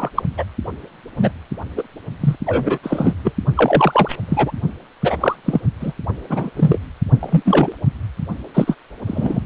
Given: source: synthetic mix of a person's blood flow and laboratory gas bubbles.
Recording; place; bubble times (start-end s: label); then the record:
Doppler ultrasound of blood flow; precordium
0.00-0.09 s: bubbles
0.14-0.22 s: bubbles
0.37-0.44 s: bubbles
1.16-1.32 s: bubbles
1.77-1.83 s: bubbles
2.21-2.36 s: bubbles
2.46-2.79 s: bubbles
2.83-3.15 s: bubbles
3.23-3.33 s: bubbles
3.56-4.16 s: bubbles
4.29-4.52 s: bubbles
5.02-5.16 s: bubbles
5.20-5.36 s: bubbles
5.45-5.61 s: bubbles
5.80-5.93 s: bubbles
6.29-6.51 s: bubbles
6.56-6.81 s: bubbles
7.19-7.72 s: bubbles
8.54-8.75 s: bubbles
9.07-9.41 s: bubbles
From the record:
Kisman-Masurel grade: 243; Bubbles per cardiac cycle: several, 3 to 8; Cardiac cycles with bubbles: 100%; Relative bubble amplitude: loud (0.450 to 0.775); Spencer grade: 3 (all of the cardiac periods contain showers or single bubble signals, but not dominating or overriding the cardiac motion signals); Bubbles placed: only in the low amplitude regions of the cardiac cycle